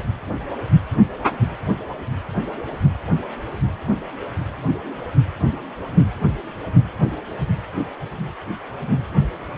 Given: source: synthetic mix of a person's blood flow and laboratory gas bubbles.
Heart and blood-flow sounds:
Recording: Doppler ultrasound of blood flow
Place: precordium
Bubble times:
no bubbles
From the record:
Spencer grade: 0 (complete lack of bubble signals)

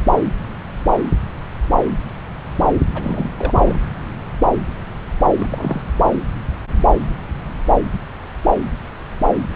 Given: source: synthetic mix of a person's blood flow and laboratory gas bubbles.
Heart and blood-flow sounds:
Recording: Doppler ultrasound of blood flow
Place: subclavian vein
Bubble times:
2.94-3.29 s: bubbles
3.38-3.81 s: bubbles
5.30-5.81 s: bubbles
From the record:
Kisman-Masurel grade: 222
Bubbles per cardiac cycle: several, 3 to 8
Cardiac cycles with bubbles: 10 to 50%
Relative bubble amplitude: moderate (0.250 to 0.450)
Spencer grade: 2 (many but less than half of the cardiac periods contain bubble signals, singularly or in groups)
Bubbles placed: anywhere in the cardiac cycle

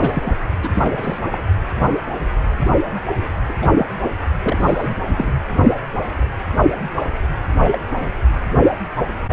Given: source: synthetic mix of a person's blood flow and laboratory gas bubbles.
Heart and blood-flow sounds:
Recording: Doppler ultrasound of blood flow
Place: precordium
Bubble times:
0.00-0.38 s: bubbles
0.62-0.69 s: bubbles
0.73-1.19 s: bubbles
1.31-1.38 s: bubbles
3.48-3.52 s: bubbles
3.62-3.67 s: bubbles
3.78-3.86 s: bubbles
4.43-4.94 s: bubbles
5.15-5.33 s: bubbles
7.57-7.78 s: bubbles
8.00-8.05 s: bubbles
From the record:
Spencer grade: 2 (many but less than half of the cardiac periods contain bubble signals, singularly or in groups)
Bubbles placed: anywhere in the cardiac cycle

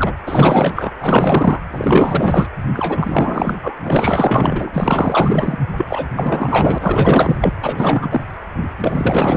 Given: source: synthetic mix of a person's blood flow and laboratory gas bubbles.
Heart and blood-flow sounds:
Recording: Doppler ultrasound of blood flow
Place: precordium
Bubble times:
0.00-0.14 s: bubbles
0.22-0.91 s: bubbles
1.00-1.60 s: bubbles
1.70-2.46 s: bubbles
2.73-3.55 s: bubbles
3.61-3.75 s: bubbles
3.84-4.71 s: bubbles
4.74-5.57 s: bubbles
5.77-6.07 s: bubbles
6.16-7.38 s: bubbles
7.40-7.53 s: bubbles
7.61-8.21 s: bubbles
8.80-9.37 s: bubbles
From the record:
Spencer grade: 4 (maximum detectable bubble signal sounding continuously throughout systole and diastole of every cardiac period, and overriding the amplitude of the normal cardiac signals)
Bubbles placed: anywhere in the cardiac cycle

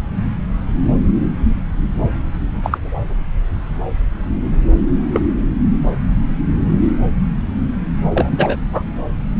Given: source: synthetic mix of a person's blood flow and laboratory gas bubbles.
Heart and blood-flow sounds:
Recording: Doppler ultrasound of blood flow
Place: subclavian vein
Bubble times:
2.62-2.78 s: bubbles
5.13-5.20 s: bubbles
8.14-8.56 s: bubbles
8.72-8.82 s: bubbles
From the record:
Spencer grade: 2 (many but less than half of the cardiac periods contain bubble signals, singularly or in groups)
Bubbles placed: anywhere in the cardiac cycle

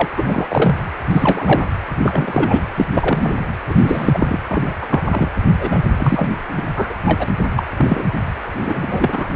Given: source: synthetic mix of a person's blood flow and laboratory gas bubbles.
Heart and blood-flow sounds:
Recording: Doppler ultrasound of blood flow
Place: precordium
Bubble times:
0.00-0.09 s: bubbles
0.17-0.76 s: bubbles
1.10-1.69 s: bubbles
2.01-2.63 s: bubbles
2.75-2.85 s: bubbles
2.94-3.38 s: bubbles
3.67-4.39 s: bubbles
4.49-4.75 s: bubbles
4.82-4.87 s: bubbles
4.90-5.03 s: bubbles
5.10-5.29 s: bubbles
5.60-5.80 s: bubbles
5.97-6.29 s: bubbles
6.51-6.62 s: bubbles
6.75-6.95 s: bubbles
7.05-7.28 s: bubbles
7.56-7.64 s: bubbles
7.77-8.05 s: bubbles
8.59-9.28 s: bubbles
From the record:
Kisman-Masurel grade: 243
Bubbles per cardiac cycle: several, 3 to 8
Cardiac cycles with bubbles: 100%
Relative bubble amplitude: loud (0.450 to 0.775)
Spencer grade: 3 (all of the cardiac periods contain showers or single bubble signals, but not dominating or overriding the cardiac motion signals)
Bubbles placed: anywhere in the cardiac cycle

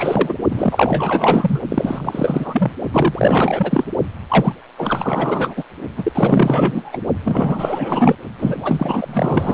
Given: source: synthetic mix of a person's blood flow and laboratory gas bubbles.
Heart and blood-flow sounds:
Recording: Doppler ultrasound of blood flow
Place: precordium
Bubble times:
0.00-0.34 s: bubbles
0.50-1.59 s: bubbles
1.69-2.71 s: bubbles
2.92-3.85 s: bubbles
4.29-4.53 s: bubbles
4.78-5.64 s: bubbles
5.96-7.03 s: bubbles
7.25-8.15 s: bubbles
8.38-9.54 s: bubbles
From the record:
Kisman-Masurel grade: 444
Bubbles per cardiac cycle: continuous sound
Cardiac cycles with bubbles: 100%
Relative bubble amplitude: maximal (0.775 to 0.999)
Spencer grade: 4 (maximum detectable bubble signal sounding continuously throughout systole and diastole of every cardiac period, and overriding the amplitude of the normal cardiac signals)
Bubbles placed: only in the low amplitude regions of the cardiac cycle

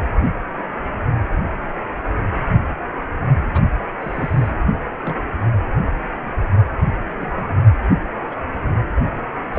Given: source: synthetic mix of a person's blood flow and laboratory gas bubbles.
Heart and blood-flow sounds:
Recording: Doppler ultrasound of blood flow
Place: precordium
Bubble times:
3.54-3.62 s: bubbles
4.00-4.50 s: bubbles
5.03-5.15 s: bubbles
7.21-7.31 s: bubbles
7.34-7.57 s: bubbles
8.16-8.36 s: bubbles
9.54-9.59 s: bubbles
From the record:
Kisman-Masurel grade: 121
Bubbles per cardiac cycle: 1 to 2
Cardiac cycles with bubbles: 10 to 50%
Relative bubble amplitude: barely perceptible (0.100 to 0.250)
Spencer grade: 2 (many but less than half of the cardiac periods contain bubble signals, singularly or in groups)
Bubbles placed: anywhere in the cardiac cycle

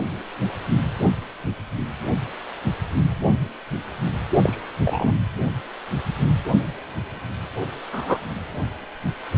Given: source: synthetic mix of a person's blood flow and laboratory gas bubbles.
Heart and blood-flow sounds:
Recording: Doppler ultrasound of blood flow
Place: precordium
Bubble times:
4.43-4.57 s: bubbles
4.83-5.15 s: bubbles
7.92-8.18 s: bubbles
From the record:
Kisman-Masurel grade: 122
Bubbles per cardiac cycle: 1 to 2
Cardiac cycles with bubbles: 10 to 50%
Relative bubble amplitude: moderate (0.250 to 0.450)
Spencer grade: 2 (many but less than half of the cardiac periods contain bubble signals, singularly or in groups)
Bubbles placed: anywhere in the cardiac cycle

